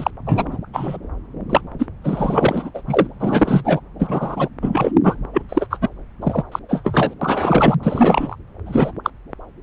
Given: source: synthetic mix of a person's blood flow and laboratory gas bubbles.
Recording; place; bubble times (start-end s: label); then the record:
Doppler ultrasound of blood flow; subclavian vein
0.00-0.10 s: bubbles
0.27-0.57 s: bubbles
0.73-0.97 s: bubbles
1.50-1.61 s: bubbles
1.79-1.87 s: bubbles
2.04-2.71 s: bubbles
2.74-2.81 s: bubbles
2.87-3.07 s: bubbles
3.19-3.62 s: bubbles
3.64-3.80 s: bubbles
3.99-4.49 s: bubbles
4.62-4.91 s: bubbles
5.04-5.16 s: bubbles
5.33-5.42 s: bubbles
5.49-5.67 s: bubbles
5.70-5.89 s: bubbles
6.21-6.43 s: bubbles
6.51-6.59 s: bubbles
6.68-7.14 s: bubbles
7.21-7.76 s: bubbles
7.82-8.36 s: bubbles
8.65-8.92 s: bubbles
9.04-9.10 s: bubbles
From the record:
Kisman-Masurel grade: 243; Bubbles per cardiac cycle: several, 3 to 8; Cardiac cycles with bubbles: 100%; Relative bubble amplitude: loud (0.450 to 0.775); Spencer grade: 3 (all of the cardiac periods contain showers or single bubble signals, but not dominating or overriding the cardiac motion signals); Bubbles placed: anywhere in the cardiac cycle